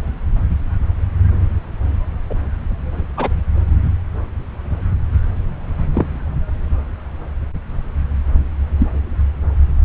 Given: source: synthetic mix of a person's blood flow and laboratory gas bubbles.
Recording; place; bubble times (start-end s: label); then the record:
Doppler ultrasound of blood flow; subclavian vein
2.29-2.34 s: bubbles
3.17-3.29 s: bubbles
5.93-6.06 s: bubbles
8.78-8.87 s: bubbles
From the record:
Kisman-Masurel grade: 122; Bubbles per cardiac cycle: 1 to 2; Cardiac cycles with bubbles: 10 to 50%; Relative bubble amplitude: moderate (0.250 to 0.450); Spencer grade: 2 (many but less than half of the cardiac periods contain bubble signals, singularly or in groups); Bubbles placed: anywhere in the cardiac cycle